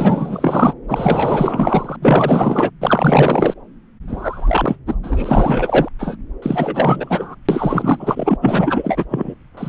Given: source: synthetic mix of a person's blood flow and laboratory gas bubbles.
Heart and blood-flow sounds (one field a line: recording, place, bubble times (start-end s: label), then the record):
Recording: Doppler ultrasound of blood flow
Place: subclavian vein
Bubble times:
0.00-0.75 s: bubbles
0.88-1.96 s: bubbles
2.02-2.71 s: bubbles
2.81-3.54 s: bubbles
4.08-4.77 s: bubbles
4.86-4.95 s: bubbles
5.03-5.88 s: bubbles
5.99-6.16 s: bubbles
6.42-7.35 s: bubbles
7.49-8.37 s: bubbles
8.41-9.05 s: bubbles
9.10-9.35 s: bubbles
9.57-9.69 s: bubbles
From the record:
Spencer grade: 4 (maximum detectable bubble signal sounding continuously throughout systole and diastole of every cardiac period, and overriding the amplitude of the normal cardiac signals)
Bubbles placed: anywhere in the cardiac cycle